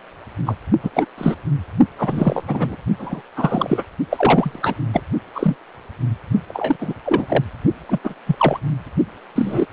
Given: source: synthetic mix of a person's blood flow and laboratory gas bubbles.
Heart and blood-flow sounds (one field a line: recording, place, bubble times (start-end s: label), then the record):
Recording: Doppler ultrasound of blood flow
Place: precordium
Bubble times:
0.46-0.57 s: bubbles
0.82-0.90 s: bubbles
0.94-1.06 s: bubbles
1.18-1.34 s: bubbles
1.98-2.44 s: bubbles
2.47-2.76 s: bubbles
2.99-3.22 s: bubbles
3.37-3.84 s: bubbles
4.10-4.74 s: bubbles
4.93-5.01 s: bubbles
5.35-5.56 s: bubbles
6.48-6.77 s: bubbles
6.80-6.94 s: bubbles
7.05-7.44 s: bubbles
7.88-8.01 s: bubbles
8.04-8.15 s: bubbles
8.27-8.60 s: bubbles
9.35-9.66 s: bubbles
From the record:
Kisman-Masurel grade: 243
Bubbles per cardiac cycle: several, 3 to 8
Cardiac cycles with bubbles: 100%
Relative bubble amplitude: loud (0.450 to 0.775)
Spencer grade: 3 (all of the cardiac periods contain showers or single bubble signals, but not dominating or overriding the cardiac motion signals)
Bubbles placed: only in the low amplitude regions of the cardiac cycle